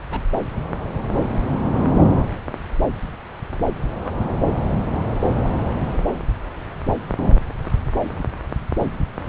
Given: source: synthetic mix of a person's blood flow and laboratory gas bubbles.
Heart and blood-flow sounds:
Doppler ultrasound of blood flow; subclavian vein
0.10-0.20 s: bubbles
From the record:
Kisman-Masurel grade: 211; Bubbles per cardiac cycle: several, 3 to 8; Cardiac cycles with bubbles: 1 to 10%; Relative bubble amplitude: barely perceptible (0.100 to 0.250); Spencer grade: 1 (occasional bubble signal discernible with the cardiac motion signal, with majority of cardiac periods free of bubbles); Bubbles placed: anywhere in the cardiac cycle

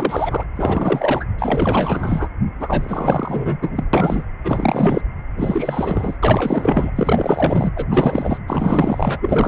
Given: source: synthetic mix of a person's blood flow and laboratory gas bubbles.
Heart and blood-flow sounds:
Doppler ultrasound of blood flow; precordium
0.00-0.44 s: bubbles
0.56-1.26 s: bubbles
1.39-2.27 s: bubbles
2.59-3.57 s: bubbles
3.61-3.84 s: bubbles
3.93-4.25 s: bubbles
4.44-5.02 s: bubbles
5.37-6.16 s: bubbles
6.23-6.91 s: bubbles
6.97-7.71 s: bubbles
7.76-7.87 s: bubbles
7.89-8.41 s: bubbles
8.47-9.48 s: bubbles
From the record:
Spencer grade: 4 (maximum detectable bubble signal sounding continuously throughout systole and diastole of every cardiac period, and overriding the amplitude of the normal cardiac signals); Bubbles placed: anywhere in the cardiac cycle

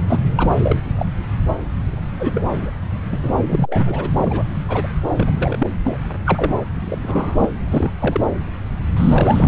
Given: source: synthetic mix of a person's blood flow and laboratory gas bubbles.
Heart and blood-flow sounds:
Doppler ultrasound of blood flow; subclavian vein
0.08-0.20 s: bubbles
0.35-0.80 s: bubbles
0.96-1.06 s: bubbles
2.19-2.45 s: bubbles
2.52-2.71 s: bubbles
2.90-3.32 s: bubbles
3.43-4.11 s: bubbles
4.17-4.45 s: bubbles
4.68-4.88 s: bubbles
5.16-5.67 s: bubbles
5.84-5.99 s: bubbles
6.24-6.66 s: bubbles
6.79-6.98 s: bubbles
7.03-7.49 s: bubbles
7.66-7.91 s: bubbles
8.00-8.21 s: bubbles
8.96-9.48 s: bubbles
From the record:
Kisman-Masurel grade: 232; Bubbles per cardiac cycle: several, 3 to 8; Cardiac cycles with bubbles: 50 to 99%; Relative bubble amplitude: moderate (0.250 to 0.450); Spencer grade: 3 (all of the cardiac periods contain showers or single bubble signals, but not dominating or overriding the cardiac motion signals); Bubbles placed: anywhere in the cardiac cycle

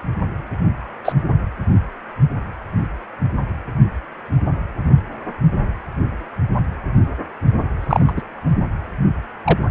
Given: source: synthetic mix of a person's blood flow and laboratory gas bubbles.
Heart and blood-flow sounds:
Doppler ultrasound of blood flow; precordium
1.05-1.12 s: bubbles
7.81-8.14 s: bubbles
8.16-8.21 s: bubbles
9.46-9.59 s: bubbles
From the record:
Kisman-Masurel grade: 123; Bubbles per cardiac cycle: 1 to 2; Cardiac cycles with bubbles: 10 to 50%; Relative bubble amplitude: loud (0.450 to 0.775); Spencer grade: 2 (many but less than half of the cardiac periods contain bubble signals, singularly or in groups); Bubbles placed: only in the low amplitude regions of the cardiac cycle

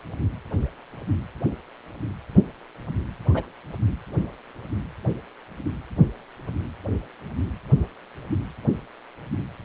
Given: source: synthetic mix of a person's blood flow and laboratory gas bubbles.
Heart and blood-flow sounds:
Doppler ultrasound of blood flow; precordium
3.27-3.46 s: bubbles
From the record:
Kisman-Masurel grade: 121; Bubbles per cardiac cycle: 1 to 2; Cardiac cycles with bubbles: 10 to 50%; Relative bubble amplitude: barely perceptible (0.100 to 0.250); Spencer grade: 2 (many but less than half of the cardiac periods contain bubble signals, singularly or in groups); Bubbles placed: anywhere in the cardiac cycle

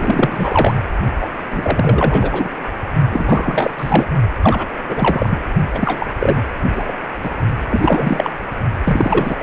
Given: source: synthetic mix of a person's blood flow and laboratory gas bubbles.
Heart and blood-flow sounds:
Doppler ultrasound of blood flow; precordium
0.00-0.74 s: bubbles
1.20-1.26 s: bubbles
1.50-2.50 s: bubbles
3.10-3.73 s: bubbles
3.77-4.08 s: bubbles
4.42-4.67 s: bubbles
4.88-5.38 s: bubbles
5.74-6.07 s: bubbles
6.20-6.42 s: bubbles
6.75-6.93 s: bubbles
7.22-7.31 s: bubbles
7.70-8.30 s: bubbles
8.84-9.43 s: bubbles
From the record:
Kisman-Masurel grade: 343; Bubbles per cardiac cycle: rolling drumbeat, 9 or more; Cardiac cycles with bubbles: 100%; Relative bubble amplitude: loud (0.450 to 0.775); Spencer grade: 3 (all of the cardiac periods contain showers or single bubble signals, but not dominating or overriding the cardiac motion signals); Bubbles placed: only in the low amplitude regions of the cardiac cycle

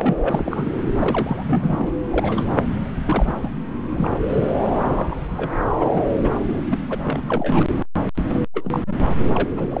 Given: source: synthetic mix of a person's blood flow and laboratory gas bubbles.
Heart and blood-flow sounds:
Doppler ultrasound of blood flow; subclavian vein
0.00-0.14 s: bubbles
0.21-0.74 s: bubbles
1.00-1.90 s: bubbles
2.11-2.45 s: bubbles
3.04-3.38 s: bubbles
3.42-3.52 s: bubbles
3.91-4.18 s: bubbles
4.29-4.47 s: bubbles
4.94-5.16 s: bubbles
5.37-5.50 s: bubbles
5.79-5.89 s: bubbles
5.92-6.06 s: bubbles
6.23-6.30 s: bubbles
6.34-6.39 s: bubbles
6.52-6.61 s: bubbles
6.71-6.78 s: bubbles
6.89-6.98 s: bubbles
7.04-7.22 s: bubbles
7.29-7.65 s: bubbles
8.15-8.23 s: bubbles
8.29-8.41 s: bubbles
8.54-8.79 s: bubbles
8.87-8.94 s: bubbles
9.34-9.47 s: bubbles
9.56-9.80 s: bubbles
From the record:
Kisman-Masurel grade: 242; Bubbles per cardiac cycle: several, 3 to 8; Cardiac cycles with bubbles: 100%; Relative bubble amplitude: moderate (0.250 to 0.450); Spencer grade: 3 (all of the cardiac periods contain showers or single bubble signals, but not dominating or overriding the cardiac motion signals); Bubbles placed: anywhere in the cardiac cycle

